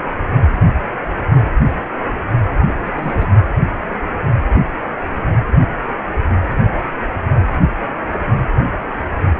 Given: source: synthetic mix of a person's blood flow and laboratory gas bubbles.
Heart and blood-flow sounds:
Doppler ultrasound of blood flow; precordium
2.67-2.74 s: bubbles
2.79-3.29 s: bubbles
From the record:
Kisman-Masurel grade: 211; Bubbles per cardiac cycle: several, 3 to 8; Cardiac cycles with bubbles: 1 to 10%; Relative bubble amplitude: barely perceptible (0.100 to 0.250); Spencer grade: 1 (occasional bubble signal discernible with the cardiac motion signal, with majority of cardiac periods free of bubbles); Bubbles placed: only in the low amplitude regions of the cardiac cycle

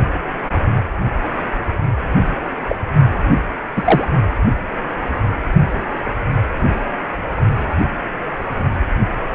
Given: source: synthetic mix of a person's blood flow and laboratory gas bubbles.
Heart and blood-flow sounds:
Doppler ultrasound of blood flow; precordium
2.68-2.76 s: bubbles
3.75-4.08 s: bubbles
From the record:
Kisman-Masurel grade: 123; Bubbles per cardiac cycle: 1 to 2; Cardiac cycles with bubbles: 10 to 50%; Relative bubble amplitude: loud (0.450 to 0.775); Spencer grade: 2 (many but less than half of the cardiac periods contain bubble signals, singularly or in groups); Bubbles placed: only in the low amplitude regions of the cardiac cycle

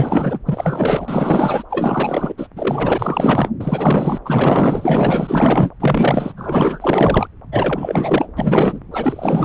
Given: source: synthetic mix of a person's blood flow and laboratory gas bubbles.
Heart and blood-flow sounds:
Doppler ultrasound of blood flow; subclavian vein
0.00-0.39 s: bubbles
0.46-1.63 s: bubbles
1.69-2.34 s: bubbles
2.38-2.47 s: bubbles
2.56-3.50 s: bubbles
3.60-4.19 s: bubbles
4.25-5.70 s: bubbles
5.79-6.33 s: bubbles
6.37-7.27 s: bubbles
7.51-8.28 s: bubbles
8.37-8.79 s: bubbles
8.92-9.45 s: bubbles
From the record:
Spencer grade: 4 (maximum detectable bubble signal sounding continuously throughout systole and diastole of every cardiac period, and overriding the amplitude of the normal cardiac signals); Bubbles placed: anywhere in the cardiac cycle

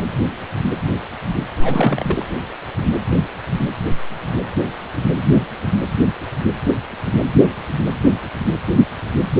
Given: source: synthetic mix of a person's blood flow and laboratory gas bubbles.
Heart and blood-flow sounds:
Doppler ultrasound of blood flow; precordium
1.62-2.25 s: bubbles
From the record:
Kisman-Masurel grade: 222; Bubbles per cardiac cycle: several, 3 to 8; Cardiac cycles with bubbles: 10 to 50%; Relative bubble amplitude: moderate (0.250 to 0.450); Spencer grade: 2 (many but less than half of the cardiac periods contain bubble signals, singularly or in groups); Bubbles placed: anywhere in the cardiac cycle

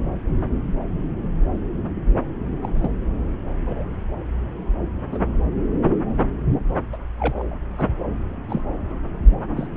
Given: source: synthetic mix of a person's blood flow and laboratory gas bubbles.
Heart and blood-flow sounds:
Doppler ultrasound of blood flow; subclavian vein
2.62-2.71 s: bubbles
2.75-2.90 s: bubbles
3.66-3.85 s: bubbles
5.12-5.21 s: bubbles
6.92-6.97 s: bubbles
7.19-7.55 s: bubbles
7.78-7.88 s: bubbles
8.49-8.62 s: bubbles
9.56-9.68 s: bubbles
From the record:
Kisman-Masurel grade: 122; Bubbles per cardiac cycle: 1 to 2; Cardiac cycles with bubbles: 10 to 50%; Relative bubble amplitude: moderate (0.250 to 0.450); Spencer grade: 2 (many but less than half of the cardiac periods contain bubble signals, singularly or in groups); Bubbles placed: anywhere in the cardiac cycle

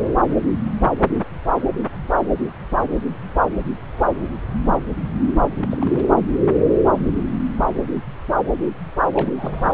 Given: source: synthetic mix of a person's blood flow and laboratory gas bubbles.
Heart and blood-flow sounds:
Doppler ultrasound of blood flow; subclavian vein
5.61-6.06 s: bubbles
9.13-9.29 s: bubbles
9.37-9.74 s: bubbles
From the record:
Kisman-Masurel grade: 221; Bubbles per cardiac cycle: several, 3 to 8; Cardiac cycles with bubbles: 10 to 50%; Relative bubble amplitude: barely perceptible (0.100 to 0.250); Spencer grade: 2 (many but less than half of the cardiac periods contain bubble signals, singularly or in groups); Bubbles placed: anywhere in the cardiac cycle

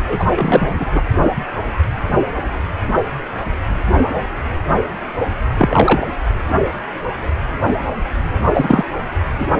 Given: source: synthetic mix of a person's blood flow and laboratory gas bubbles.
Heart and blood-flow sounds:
Doppler ultrasound of blood flow; precordium
0.07-0.26 s: bubbles
0.35-0.85 s: bubbles
0.91-1.02 s: bubbles
5.57-6.11 s: bubbles
8.54-8.85 s: bubbles
9.39-9.46 s: bubbles
From the record:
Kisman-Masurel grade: 223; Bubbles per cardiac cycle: several, 3 to 8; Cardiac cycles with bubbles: 10 to 50%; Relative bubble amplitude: loud (0.450 to 0.775); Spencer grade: 2 (many but less than half of the cardiac periods contain bubble signals, singularly or in groups); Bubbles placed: only in the low amplitude regions of the cardiac cycle

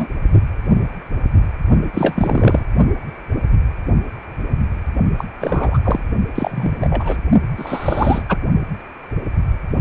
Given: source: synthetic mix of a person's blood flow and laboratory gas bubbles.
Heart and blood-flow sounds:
Doppler ultrasound of blood flow; precordium
0.00-0.07 s: bubbles
1.94-2.65 s: bubbles
5.18-5.26 s: bubbles
5.40-5.79 s: bubbles
5.83-6.03 s: bubbles
6.35-7.19 s: bubbles
7.57-8.22 s: bubbles
8.29-8.38 s: bubbles
From the record:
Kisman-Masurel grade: 333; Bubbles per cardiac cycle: rolling drumbeat, 9 or more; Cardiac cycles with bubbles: 50 to 99%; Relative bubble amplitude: loud (0.450 to 0.775); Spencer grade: 3 (all of the cardiac periods contain showers or single bubble signals, but not dominating or overriding the cardiac motion signals); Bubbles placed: only in the low amplitude regions of the cardiac cycle

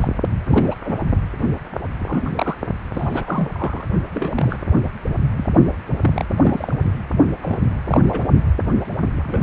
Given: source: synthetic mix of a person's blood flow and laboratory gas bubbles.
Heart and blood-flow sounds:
Doppler ultrasound of blood flow; precordium
0.01-0.08 s: bubbles
0.43-0.75 s: bubbles
0.84-0.95 s: bubbles
1.99-2.30 s: bubbles
2.36-2.55 s: bubbles
2.92-3.47 s: bubbles
3.54-3.86 s: bubbles
4.12-4.58 s: bubbles
5.37-5.49 s: bubbles
6.01-6.25 s: bubbles
6.43-6.75 s: bubbles
7.42-7.64 s: bubbles
7.67-7.79 s: bubbles
7.88-8.00 s: bubbles
8.10-8.23 s: bubbles
9.19-9.43 s: bubbles
From the record:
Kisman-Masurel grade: 242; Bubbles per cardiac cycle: several, 3 to 8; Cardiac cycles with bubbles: 100%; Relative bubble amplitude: moderate (0.250 to 0.450); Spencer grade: 3 (all of the cardiac periods contain showers or single bubble signals, but not dominating or overriding the cardiac motion signals); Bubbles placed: only in the low amplitude regions of the cardiac cycle

